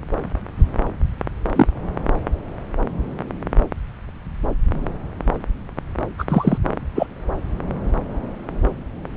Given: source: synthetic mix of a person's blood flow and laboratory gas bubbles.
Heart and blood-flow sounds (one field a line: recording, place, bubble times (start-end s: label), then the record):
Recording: Doppler ultrasound of blood flow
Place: subclavian vein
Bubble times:
1.55-1.67 s: bubbles
6.18-6.25 s: bubbles
6.29-6.57 s: bubbles
6.95-7.06 s: bubbles
From the record:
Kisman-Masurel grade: 123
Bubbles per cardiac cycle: 1 to 2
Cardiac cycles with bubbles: 10 to 50%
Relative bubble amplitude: loud (0.450 to 0.775)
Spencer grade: 2 (many but less than half of the cardiac periods contain bubble signals, singularly or in groups)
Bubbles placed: anywhere in the cardiac cycle